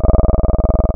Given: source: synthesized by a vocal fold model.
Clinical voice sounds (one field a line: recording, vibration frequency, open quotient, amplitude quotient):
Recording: sustained vowel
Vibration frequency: 20 Hz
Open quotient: 0.3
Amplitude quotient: 1